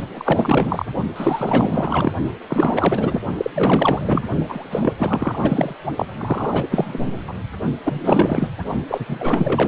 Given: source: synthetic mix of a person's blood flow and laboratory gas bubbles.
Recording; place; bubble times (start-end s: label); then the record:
Doppler ultrasound of blood flow; precordium
0.13-0.86 s: bubbles
1.16-2.13 s: bubbles
2.47-3.21 s: bubbles
3.37-3.50 s: bubbles
3.54-4.23 s: bubbles
4.49-4.93 s: bubbles
4.97-5.38 s: bubbles
5.41-5.75 s: bubbles
5.96-6.06 s: bubbles
6.17-6.65 s: bubbles
6.70-7.21 s: bubbles
7.27-7.33 s: bubbles
7.84-8.48 s: bubbles
8.88-9.68 s: bubbles
From the record:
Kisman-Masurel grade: 444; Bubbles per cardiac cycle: continuous sound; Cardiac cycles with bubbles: 100%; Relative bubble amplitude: maximal (0.775 to 0.999); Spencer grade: 4 (maximum detectable bubble signal sounding continuously throughout systole and diastole of every cardiac period, and overriding the amplitude of the normal cardiac signals); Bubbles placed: only in the low amplitude regions of the cardiac cycle